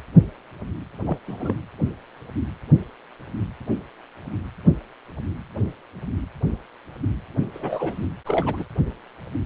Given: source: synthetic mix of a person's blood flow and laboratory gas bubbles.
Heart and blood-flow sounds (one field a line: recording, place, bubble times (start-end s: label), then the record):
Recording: Doppler ultrasound of blood flow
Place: precordium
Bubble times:
1.06-1.18 s: bubbles
1.28-1.54 s: bubbles
7.54-8.06 s: bubbles
8.26-8.65 s: bubbles
From the record:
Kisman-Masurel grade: 222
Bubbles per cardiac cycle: several, 3 to 8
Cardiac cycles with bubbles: 10 to 50%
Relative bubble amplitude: moderate (0.250 to 0.450)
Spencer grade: 2 (many but less than half of the cardiac periods contain bubble signals, singularly or in groups)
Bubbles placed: anywhere in the cardiac cycle